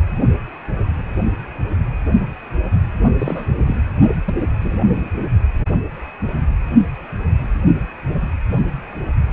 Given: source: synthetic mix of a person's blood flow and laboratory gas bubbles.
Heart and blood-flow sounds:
Doppler ultrasound of blood flow; precordium
3.19-3.46 s: bubbles
3.66-3.75 s: bubbles
4.26-4.34 s: bubbles
4.60-4.76 s: bubbles
4.95-5.10 s: bubbles
From the record:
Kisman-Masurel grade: 222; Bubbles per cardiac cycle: several, 3 to 8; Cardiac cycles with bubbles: 10 to 50%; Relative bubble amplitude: moderate (0.250 to 0.450); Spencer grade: 2 (many but less than half of the cardiac periods contain bubble signals, singularly or in groups); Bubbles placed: only in the low amplitude regions of the cardiac cycle

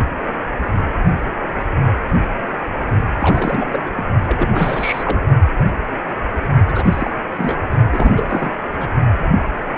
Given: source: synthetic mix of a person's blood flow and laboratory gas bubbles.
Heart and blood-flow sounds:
Doppler ultrasound of blood flow; precordium
3.15-3.79 s: bubbles
3.85-3.91 s: bubbles
3.95-4.04 s: bubbles
4.26-4.48 s: bubbles
4.51-5.22 s: bubbles
6.67-7.10 s: bubbles
7.25-7.58 s: bubbles
7.93-8.54 s: bubbles
8.78-9.03 s: bubbles
From the record:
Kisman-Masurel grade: 332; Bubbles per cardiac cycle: rolling drumbeat, 9 or more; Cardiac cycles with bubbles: 50 to 99%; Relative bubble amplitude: moderate (0.250 to 0.450); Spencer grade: 3 (all of the cardiac periods contain showers or single bubble signals, but not dominating or overriding the cardiac motion signals); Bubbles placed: only in the low amplitude regions of the cardiac cycle

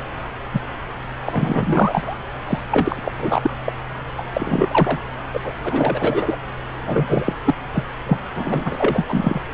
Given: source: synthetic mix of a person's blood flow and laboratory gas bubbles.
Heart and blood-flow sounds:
Doppler ultrasound of blood flow; subclavian vein
0.53-0.61 s: bubbles
1.24-2.17 s: bubbles
2.45-2.59 s: bubbles
2.71-3.11 s: bubbles
3.17-3.55 s: bubbles
3.66-3.72 s: bubbles
4.18-4.23 s: bubbles
4.33-5.00 s: bubbles
5.33-5.41 s: bubbles
5.43-5.53 s: bubbles
5.63-6.36 s: bubbles
6.85-7.34 s: bubbles
7.45-7.54 s: bubbles
7.73-7.84 s: bubbles
8.05-8.17 s: bubbles
8.36-9.41 s: bubbles
From the record:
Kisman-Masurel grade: 333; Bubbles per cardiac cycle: rolling drumbeat, 9 or more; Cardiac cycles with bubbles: 50 to 99%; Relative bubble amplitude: loud (0.450 to 0.775); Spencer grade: 3 (all of the cardiac periods contain showers or single bubble signals, but not dominating or overriding the cardiac motion signals); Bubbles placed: anywhere in the cardiac cycle

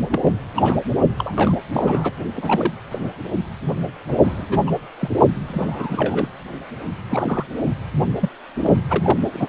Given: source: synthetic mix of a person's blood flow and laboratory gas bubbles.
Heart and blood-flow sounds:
Doppler ultrasound of blood flow; precordium
0.10-0.31 s: bubbles
0.56-0.77 s: bubbles
1.17-1.57 s: bubbles
1.71-2.13 s: bubbles
2.34-2.73 s: bubbles
2.90-3.10 s: bubbles
4.08-4.17 s: bubbles
4.23-4.58 s: bubbles
4.66-4.72 s: bubbles
4.99-5.10 s: bubbles
5.47-6.28 s: bubbles
7.09-7.44 s: bubbles
7.67-7.73 s: bubbles
8.20-8.29 s: bubbles
8.62-8.73 s: bubbles
8.89-9.19 s: bubbles
9.33-9.48 s: bubbles
From the record:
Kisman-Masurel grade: 242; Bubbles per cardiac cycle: several, 3 to 8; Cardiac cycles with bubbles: 100%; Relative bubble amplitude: moderate (0.250 to 0.450); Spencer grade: 3 (all of the cardiac periods contain showers or single bubble signals, but not dominating or overriding the cardiac motion signals); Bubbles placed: only in the low amplitude regions of the cardiac cycle

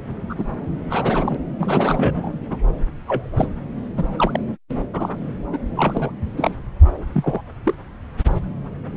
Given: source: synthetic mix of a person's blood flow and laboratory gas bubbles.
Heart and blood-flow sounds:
Doppler ultrasound of blood flow; subclavian vein
0.30-0.34 s: bubbles
0.38-0.45 s: bubbles
0.90-1.35 s: bubbles
1.59-2.33 s: bubbles
2.50-2.58 s: bubbles
3.07-3.29 s: bubbles
3.37-3.49 s: bubbles
3.97-4.06 s: bubbles
4.17-4.43 s: bubbles
4.94-5.16 s: bubbles
5.53-5.58 s: bubbles
5.75-6.11 s: bubbles
6.36-6.55 s: bubbles
7.13-7.42 s: bubbles
7.65-7.75 s: bubbles
From the record:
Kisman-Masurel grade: 232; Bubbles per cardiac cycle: several, 3 to 8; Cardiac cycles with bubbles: 50 to 99%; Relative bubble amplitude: moderate (0.250 to 0.450); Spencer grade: 3 (all of the cardiac periods contain showers or single bubble signals, but not dominating or overriding the cardiac motion signals); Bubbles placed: anywhere in the cardiac cycle

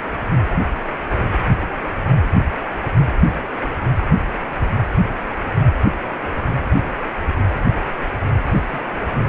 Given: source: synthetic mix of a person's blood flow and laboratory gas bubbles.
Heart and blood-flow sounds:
Doppler ultrasound of blood flow; precordium
8.46-8.83 s: bubbles
From the record:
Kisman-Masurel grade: 111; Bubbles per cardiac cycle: 1 to 2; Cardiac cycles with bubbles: 1 to 10%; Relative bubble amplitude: barely perceptible (0.100 to 0.250); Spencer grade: 1 (occasional bubble signal discernible with the cardiac motion signal, with majority of cardiac periods free of bubbles); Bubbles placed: anywhere in the cardiac cycle

